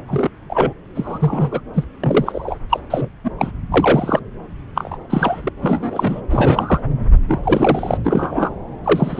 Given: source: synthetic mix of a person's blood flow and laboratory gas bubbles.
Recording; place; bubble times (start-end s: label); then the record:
Doppler ultrasound of blood flow; subclavian vein
0.07-0.30 s: bubbles
0.49-0.73 s: bubbles
0.95-1.61 s: bubbles
1.73-1.84 s: bubbles
2.04-2.55 s: bubbles
2.69-2.80 s: bubbles
2.90-3.08 s: bubbles
3.24-3.31 s: bubbles
3.38-3.51 s: bubbles
3.71-4.19 s: bubbles
4.75-4.97 s: bubbles
5.09-5.49 s: bubbles
5.62-6.21 s: bubbles
6.30-6.80 s: bubbles
7.28-7.38 s: bubbles
7.43-7.97 s: bubbles
8.03-8.50 s: bubbles
8.84-9.20 s: bubbles
From the record:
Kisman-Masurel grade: 233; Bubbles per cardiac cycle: several, 3 to 8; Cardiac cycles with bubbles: 50 to 99%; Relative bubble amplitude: loud (0.450 to 0.775); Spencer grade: 3 (all of the cardiac periods contain showers or single bubble signals, but not dominating or overriding the cardiac motion signals); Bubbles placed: anywhere in the cardiac cycle